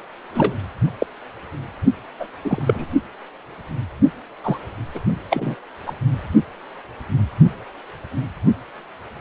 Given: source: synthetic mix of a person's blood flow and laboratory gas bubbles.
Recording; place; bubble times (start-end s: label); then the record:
Doppler ultrasound of blood flow; precordium
0.34-0.56 s: bubbles
0.99-1.06 s: bubbles
2.19-2.27 s: bubbles
2.44-2.92 s: bubbles
4.43-4.58 s: bubbles
4.94-5.00 s: bubbles
5.30-5.55 s: bubbles
5.87-5.93 s: bubbles
From the record:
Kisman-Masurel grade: 222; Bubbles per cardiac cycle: several, 3 to 8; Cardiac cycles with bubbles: 10 to 50%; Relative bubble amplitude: moderate (0.250 to 0.450); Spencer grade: 2 (many but less than half of the cardiac periods contain bubble signals, singularly or in groups); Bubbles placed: only in the low amplitude regions of the cardiac cycle